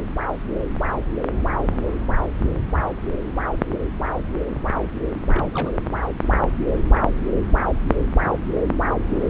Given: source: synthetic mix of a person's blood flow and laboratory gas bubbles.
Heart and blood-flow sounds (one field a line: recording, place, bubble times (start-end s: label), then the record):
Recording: Doppler ultrasound of blood flow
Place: subclavian vein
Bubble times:
5.26-5.70 s: bubbles
From the record:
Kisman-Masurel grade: 211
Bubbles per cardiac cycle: several, 3 to 8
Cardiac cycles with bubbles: 1 to 10%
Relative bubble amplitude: barely perceptible (0.100 to 0.250)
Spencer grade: 1 (occasional bubble signal discernible with the cardiac motion signal, with majority of cardiac periods free of bubbles)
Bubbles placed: anywhere in the cardiac cycle